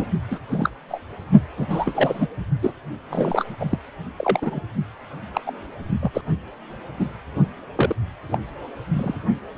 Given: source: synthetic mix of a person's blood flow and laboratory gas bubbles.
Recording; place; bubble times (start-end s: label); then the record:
Doppler ultrasound of blood flow; precordium
0.00-0.05 s: bubbles
0.31-0.39 s: bubbles
0.49-0.70 s: bubbles
0.88-1.01 s: bubbles
1.56-1.66 s: bubbles
1.70-2.27 s: bubbles
2.62-2.73 s: bubbles
3.10-3.44 s: bubbles
3.59-3.65 s: bubbles
3.69-3.78 s: bubbles
4.16-4.60 s: bubbles
5.33-5.41 s: bubbles
5.46-5.52 s: bubbles
6.01-6.11 s: bubbles
6.13-6.21 s: bubbles
6.99-7.08 s: bubbles
7.76-7.95 s: bubbles
8.30-8.38 s: bubbles
8.93-9.18 s: bubbles
From the record:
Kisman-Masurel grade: 242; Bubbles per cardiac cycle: several, 3 to 8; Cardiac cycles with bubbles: 100%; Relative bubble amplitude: moderate (0.250 to 0.450); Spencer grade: 3 (all of the cardiac periods contain showers or single bubble signals, but not dominating or overriding the cardiac motion signals); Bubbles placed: only in the low amplitude regions of the cardiac cycle